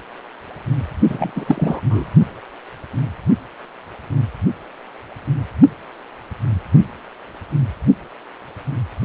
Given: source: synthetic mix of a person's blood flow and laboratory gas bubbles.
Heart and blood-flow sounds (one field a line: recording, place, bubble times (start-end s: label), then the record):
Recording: Doppler ultrasound of blood flow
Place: precordium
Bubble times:
1.09-2.09 s: bubbles
From the record:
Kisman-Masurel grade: 212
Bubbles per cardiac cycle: several, 3 to 8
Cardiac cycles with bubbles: 1 to 10%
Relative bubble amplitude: moderate (0.250 to 0.450)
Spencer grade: 1 (occasional bubble signal discernible with the cardiac motion signal, with majority of cardiac periods free of bubbles)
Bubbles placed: only in the low amplitude regions of the cardiac cycle